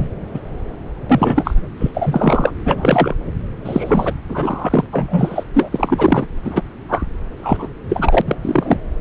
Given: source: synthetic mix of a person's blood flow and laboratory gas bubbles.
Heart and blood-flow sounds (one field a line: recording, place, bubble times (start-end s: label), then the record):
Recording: Doppler ultrasound of blood flow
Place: subclavian vein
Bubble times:
0.00-0.07 s: bubbles
0.34-0.40 s: bubbles
1.09-1.54 s: bubbles
1.80-1.91 s: bubbles
1.94-2.51 s: bubbles
2.65-3.15 s: bubbles
3.64-4.12 s: bubbles
4.29-4.84 s: bubbles
4.92-5.44 s: bubbles
5.54-6.26 s: bubbles
6.45-6.62 s: bubbles
6.89-7.04 s: bubbles
7.38-7.68 s: bubbles
7.89-8.21 s: bubbles
8.26-8.35 s: bubbles
8.41-8.77 s: bubbles
From the record:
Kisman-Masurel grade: 243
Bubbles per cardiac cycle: several, 3 to 8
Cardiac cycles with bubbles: 100%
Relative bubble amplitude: loud (0.450 to 0.775)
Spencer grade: 3 (all of the cardiac periods contain showers or single bubble signals, but not dominating or overriding the cardiac motion signals)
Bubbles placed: anywhere in the cardiac cycle